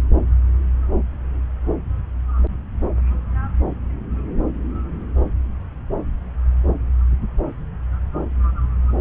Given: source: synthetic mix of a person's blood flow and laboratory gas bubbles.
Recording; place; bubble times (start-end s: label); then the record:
Doppler ultrasound of blood flow; subclavian vein
no bubbles
From the record:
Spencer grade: 0 (complete lack of bubble signals)